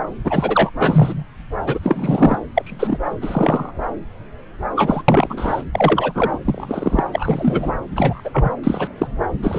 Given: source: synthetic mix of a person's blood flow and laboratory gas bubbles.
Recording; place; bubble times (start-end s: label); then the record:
Doppler ultrasound of blood flow; subclavian vein
0.24-0.70 s: bubbles
0.79-1.24 s: bubbles
1.66-1.79 s: bubbles
1.82-2.35 s: bubbles
2.54-2.98 s: bubbles
3.22-3.72 s: bubbles
4.75-5.02 s: bubbles
5.08-5.63 s: bubbles
5.72-6.12 s: bubbles
6.15-6.38 s: bubbles
6.44-7.03 s: bubbles
7.12-7.71 s: bubbles
7.96-8.21 s: bubbles
8.24-8.30 s: bubbles
8.33-8.50 s: bubbles
8.63-8.88 s: bubbles
8.98-9.07 s: bubbles
9.42-9.59 s: bubbles
From the record:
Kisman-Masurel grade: 243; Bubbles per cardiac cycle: several, 3 to 8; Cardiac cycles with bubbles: 100%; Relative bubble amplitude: loud (0.450 to 0.775); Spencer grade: 3 (all of the cardiac periods contain showers or single bubble signals, but not dominating or overriding the cardiac motion signals); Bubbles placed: anywhere in the cardiac cycle